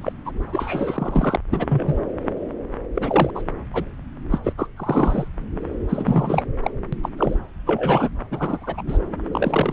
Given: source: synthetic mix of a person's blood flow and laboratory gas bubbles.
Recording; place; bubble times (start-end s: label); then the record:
Doppler ultrasound of blood flow; subclavian vein
0.01-0.12 s: bubbles
0.26-0.31 s: bubbles
0.52-1.36 s: bubbles
1.51-1.95 s: bubbles
2.95-3.31 s: bubbles
3.35-3.43 s: bubbles
3.73-3.86 s: bubbles
4.30-4.38 s: bubbles
4.43-4.53 s: bubbles
4.58-4.67 s: bubbles
4.76-5.29 s: bubbles
5.88-6.45 s: bubbles
6.62-6.71 s: bubbles
6.92-6.97 s: bubbles
7.03-7.09 s: bubbles
7.17-7.36 s: bubbles
7.65-8.09 s: bubbles
8.30-8.83 s: bubbles
8.87-8.98 s: bubbles
9.32-9.73 s: bubbles
From the record:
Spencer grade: 3 (all of the cardiac periods contain showers or single bubble signals, but not dominating or overriding the cardiac motion signals); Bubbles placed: anywhere in the cardiac cycle